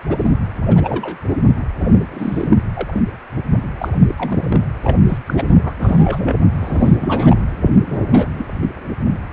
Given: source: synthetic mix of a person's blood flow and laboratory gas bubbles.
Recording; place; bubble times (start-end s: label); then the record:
Doppler ultrasound of blood flow; precordium
0.02-0.35 s: bubbles
0.68-1.18 s: bubbles
1.79-2.58 s: bubbles
2.74-3.02 s: bubbles
3.63-3.69 s: bubbles
3.80-3.89 s: bubbles
4.08-4.14 s: bubbles
4.18-4.62 s: bubbles
4.84-4.97 s: bubbles
5.07-5.18 s: bubbles
5.26-5.54 s: bubbles
5.63-5.72 s: bubbles
5.79-6.35 s: bubbles
6.60-7.41 s: bubbles
7.87-7.96 s: bubbles
8.11-8.28 s: bubbles
8.38-8.46 s: bubbles
8.62-8.67 s: bubbles
9.10-9.19 s: bubbles
From the record:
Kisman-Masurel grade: 242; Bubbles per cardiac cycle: several, 3 to 8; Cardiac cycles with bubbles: 100%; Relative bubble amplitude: moderate (0.250 to 0.450); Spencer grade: 3 (all of the cardiac periods contain showers or single bubble signals, but not dominating or overriding the cardiac motion signals); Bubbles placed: anywhere in the cardiac cycle